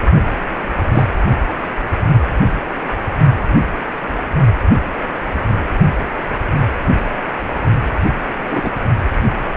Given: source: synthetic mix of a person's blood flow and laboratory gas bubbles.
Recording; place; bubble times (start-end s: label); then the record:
Doppler ultrasound of blood flow; precordium
0.92-1.05 s: bubbles
8.49-8.69 s: bubbles
From the record:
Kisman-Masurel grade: 123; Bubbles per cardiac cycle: 1 to 2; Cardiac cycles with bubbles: 10 to 50%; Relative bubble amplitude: loud (0.450 to 0.775); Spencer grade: 2 (many but less than half of the cardiac periods contain bubble signals, singularly or in groups); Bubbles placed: only in the low amplitude regions of the cardiac cycle